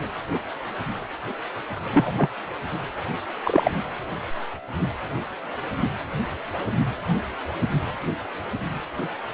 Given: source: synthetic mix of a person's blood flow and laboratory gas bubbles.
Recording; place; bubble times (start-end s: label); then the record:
Doppler ultrasound of blood flow; precordium
1.92-2.29 s: bubbles
3.43-3.71 s: bubbles
From the record:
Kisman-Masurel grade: 122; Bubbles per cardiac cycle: 1 to 2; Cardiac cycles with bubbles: 10 to 50%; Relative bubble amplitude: moderate (0.250 to 0.450); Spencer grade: 2 (many but less than half of the cardiac periods contain bubble signals, singularly or in groups); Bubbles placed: anywhere in the cardiac cycle